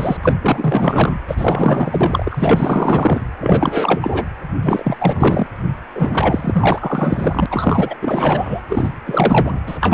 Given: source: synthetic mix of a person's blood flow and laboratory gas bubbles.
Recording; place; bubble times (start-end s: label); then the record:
Doppler ultrasound of blood flow; precordium
0.00-0.17 s: bubbles
0.22-0.33 s: bubbles
0.41-1.18 s: bubbles
1.27-3.27 s: bubbles
3.40-4.27 s: bubbles
4.61-5.47 s: bubbles
5.95-7.46 s: bubbles
7.50-7.95 s: bubbles
8.01-8.61 s: bubbles
8.69-8.91 s: bubbles
9.05-9.61 s: bubbles
9.67-9.94 s: bubbles
From the record:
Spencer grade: 4 (maximum detectable bubble signal sounding continuously throughout systole and diastole of every cardiac period, and overriding the amplitude of the normal cardiac signals); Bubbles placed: anywhere in the cardiac cycle